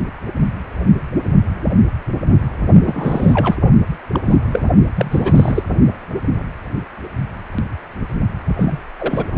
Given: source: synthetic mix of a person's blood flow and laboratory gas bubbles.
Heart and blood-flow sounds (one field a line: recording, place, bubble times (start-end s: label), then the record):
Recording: Doppler ultrasound of blood flow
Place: precordium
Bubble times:
2.85-3.56 s: bubbles
4.12-4.20 s: bubbles
4.25-4.35 s: bubbles
4.43-4.60 s: bubbles
4.96-5.64 s: bubbles
8.58-8.79 s: bubbles
8.99-9.28 s: bubbles
From the record:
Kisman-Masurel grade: 222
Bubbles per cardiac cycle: several, 3 to 8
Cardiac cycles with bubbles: 10 to 50%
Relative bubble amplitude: moderate (0.250 to 0.450)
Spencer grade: 2 (many but less than half of the cardiac periods contain bubble signals, singularly or in groups)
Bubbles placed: only in the low amplitude regions of the cardiac cycle